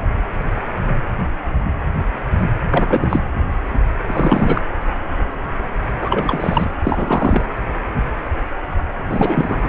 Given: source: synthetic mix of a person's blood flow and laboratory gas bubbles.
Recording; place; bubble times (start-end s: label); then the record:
Doppler ultrasound of blood flow; precordium
2.71-3.19 s: bubbles
4.07-4.62 s: bubbles
5.99-6.75 s: bubbles
6.82-7.46 s: bubbles
9.09-9.69 s: bubbles
From the record:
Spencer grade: 3 (all of the cardiac periods contain showers or single bubble signals, but not dominating or overriding the cardiac motion signals); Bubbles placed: anywhere in the cardiac cycle